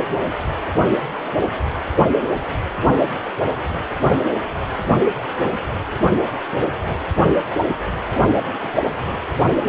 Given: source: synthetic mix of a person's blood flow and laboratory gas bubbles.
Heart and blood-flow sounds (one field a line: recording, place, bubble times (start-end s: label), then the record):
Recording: Doppler ultrasound of blood flow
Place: precordium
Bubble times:
8.43-8.71 s: bubbles
From the record:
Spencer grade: 2 (many but less than half of the cardiac periods contain bubble signals, singularly or in groups)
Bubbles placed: only in the low amplitude regions of the cardiac cycle